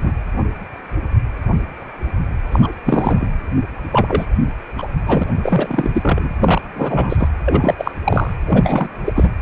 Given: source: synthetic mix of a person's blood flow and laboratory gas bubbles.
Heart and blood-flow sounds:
Doppler ultrasound of blood flow; precordium
0.00-0.12 s: bubbles
2.52-2.60 s: bubbles
2.62-2.71 s: bubbles
2.85-3.27 s: bubbles
3.92-4.26 s: bubbles
4.77-4.88 s: bubbles
5.05-5.23 s: bubbles
5.42-5.91 s: bubbles
5.93-6.33 s: bubbles
6.39-6.61 s: bubbles
6.75-7.28 s: bubbles
7.45-7.75 s: bubbles
7.78-7.91 s: bubbles
8.04-8.33 s: bubbles
8.45-8.88 s: bubbles
9.05-9.30 s: bubbles
From the record:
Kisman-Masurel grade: 333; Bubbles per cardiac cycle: rolling drumbeat, 9 or more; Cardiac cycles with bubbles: 50 to 99%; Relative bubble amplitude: loud (0.450 to 0.775); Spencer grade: 3 (all of the cardiac periods contain showers or single bubble signals, but not dominating or overriding the cardiac motion signals); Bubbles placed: anywhere in the cardiac cycle

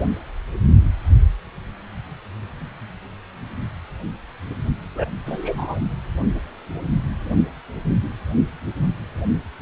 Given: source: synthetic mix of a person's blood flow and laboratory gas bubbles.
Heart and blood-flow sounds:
Doppler ultrasound of blood flow; precordium
4.96-5.05 s: bubbles
5.26-5.80 s: bubbles
From the record:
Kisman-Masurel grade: 113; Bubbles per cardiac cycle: 1 to 2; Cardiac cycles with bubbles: 1 to 10%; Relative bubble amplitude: loud (0.450 to 0.775); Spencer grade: 1 (occasional bubble signal discernible with the cardiac motion signal, with majority of cardiac periods free of bubbles); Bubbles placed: only in the low amplitude regions of the cardiac cycle

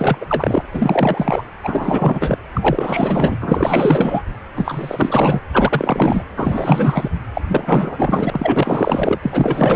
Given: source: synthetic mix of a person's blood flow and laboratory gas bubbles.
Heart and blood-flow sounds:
Doppler ultrasound of blood flow; precordium
0.00-0.18 s: bubbles
0.20-0.26 s: bubbles
0.28-0.63 s: bubbles
0.71-1.42 s: bubbles
1.63-2.38 s: bubbles
2.54-3.36 s: bubbles
3.40-4.22 s: bubbles
4.54-5.41 s: bubbles
5.53-6.24 s: bubbles
6.32-7.09 s: bubbles
7.33-7.42 s: bubbles
7.47-9.19 s: bubbles
9.22-9.76 s: bubbles
From the record:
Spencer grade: 4 (maximum detectable bubble signal sounding continuously throughout systole and diastole of every cardiac period, and overriding the amplitude of the normal cardiac signals); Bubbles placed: anywhere in the cardiac cycle

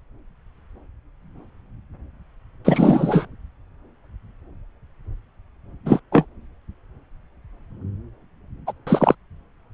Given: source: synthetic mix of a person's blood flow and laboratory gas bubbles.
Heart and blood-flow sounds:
Doppler ultrasound of blood flow; subclavian vein
2.65-3.25 s: bubbles
5.86-6.00 s: bubbles
6.12-6.26 s: bubbles
8.66-8.72 s: bubbles
8.86-9.15 s: bubbles
From the record:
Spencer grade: 2 (many but less than half of the cardiac periods contain bubble signals, singularly or in groups); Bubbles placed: anywhere in the cardiac cycle

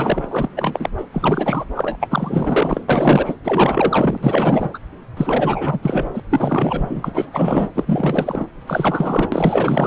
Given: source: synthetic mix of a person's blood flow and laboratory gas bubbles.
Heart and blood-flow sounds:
Doppler ultrasound of blood flow; subclavian vein
0.00-0.49 s: bubbles
0.56-0.89 s: bubbles
0.97-1.05 s: bubbles
1.12-1.65 s: bubbles
1.74-1.97 s: bubbles
2.01-2.83 s: bubbles
2.88-3.36 s: bubbles
3.44-4.18 s: bubbles
4.21-4.70 s: bubbles
4.74-4.79 s: bubbles
5.17-5.79 s: bubbles
5.82-6.09 s: bubbles
6.14-6.20 s: bubbles
6.30-7.69 s: bubbles
7.75-8.47 s: bubbles
8.67-9.87 s: bubbles
From the record:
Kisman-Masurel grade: 444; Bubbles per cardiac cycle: continuous sound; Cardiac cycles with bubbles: 100%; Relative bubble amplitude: maximal (0.775 to 0.999); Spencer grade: 4 (maximum detectable bubble signal sounding continuously throughout systole and diastole of every cardiac period, and overriding the amplitude of the normal cardiac signals); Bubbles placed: anywhere in the cardiac cycle

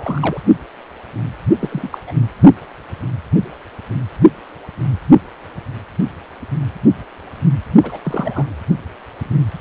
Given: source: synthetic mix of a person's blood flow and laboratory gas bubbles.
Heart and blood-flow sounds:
Doppler ultrasound of blood flow; precordium
0.00-0.41 s: bubbles
1.59-1.98 s: bubbles
2.06-2.12 s: bubbles
7.83-7.99 s: bubbles
8.02-8.46 s: bubbles
From the record:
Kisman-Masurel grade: 222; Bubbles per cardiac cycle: several, 3 to 8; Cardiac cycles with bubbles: 10 to 50%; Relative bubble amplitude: moderate (0.250 to 0.450); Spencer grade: 2 (many but less than half of the cardiac periods contain bubble signals, singularly or in groups); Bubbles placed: only in the low amplitude regions of the cardiac cycle

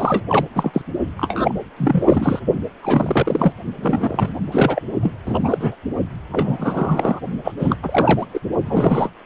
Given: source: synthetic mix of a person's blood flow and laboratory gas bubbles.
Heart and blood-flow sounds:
Doppler ultrasound of blood flow; precordium
0.00-0.23 s: bubbles
0.29-0.45 s: bubbles
0.55-0.84 s: bubbles
1.17-1.55 s: bubbles
1.78-2.39 s: bubbles
2.82-3.53 s: bubbles
3.82-4.33 s: bubbles
4.51-4.82 s: bubbles
5.02-5.13 s: bubbles
5.25-5.75 s: bubbles
6.32-7.20 s: bubbles
7.44-7.52 s: bubbles
7.58-7.75 s: bubbles
7.82-8.24 s: bubbles
8.33-8.39 s: bubbles
8.66-9.10 s: bubbles
From the record:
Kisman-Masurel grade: 343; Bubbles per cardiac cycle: rolling drumbeat, 9 or more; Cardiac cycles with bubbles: 100%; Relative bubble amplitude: loud (0.450 to 0.775); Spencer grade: 3 (all of the cardiac periods contain showers or single bubble signals, but not dominating or overriding the cardiac motion signals); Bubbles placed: only in the low amplitude regions of the cardiac cycle

